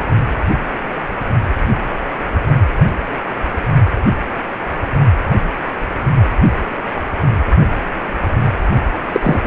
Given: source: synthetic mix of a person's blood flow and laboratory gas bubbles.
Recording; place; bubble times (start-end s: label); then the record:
Doppler ultrasound of blood flow; precordium
9.12-9.47 s: bubbles
From the record:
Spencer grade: 1 (occasional bubble signal discernible with the cardiac motion signal, with majority of cardiac periods free of bubbles); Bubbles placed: only in the low amplitude regions of the cardiac cycle